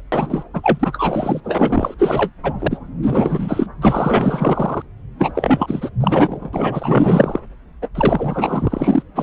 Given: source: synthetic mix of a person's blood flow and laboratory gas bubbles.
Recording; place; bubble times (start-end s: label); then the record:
Doppler ultrasound of blood flow; subclavian vein
0.12-0.43 s: bubbles
0.53-1.40 s: bubbles
1.44-1.94 s: bubbles
1.98-2.32 s: bubbles
2.42-2.53 s: bubbles
2.58-2.67 s: bubbles
2.71-2.78 s: bubbles
3.02-3.67 s: bubbles
3.81-4.83 s: bubbles
5.19-5.89 s: bubbles
6.00-6.50 s: bubbles
6.53-7.40 s: bubbles
7.82-7.88 s: bubbles
7.94-9.03 s: bubbles
9.15-9.23 s: bubbles
From the record:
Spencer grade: 4 (maximum detectable bubble signal sounding continuously throughout systole and diastole of every cardiac period, and overriding the amplitude of the normal cardiac signals); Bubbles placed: anywhere in the cardiac cycle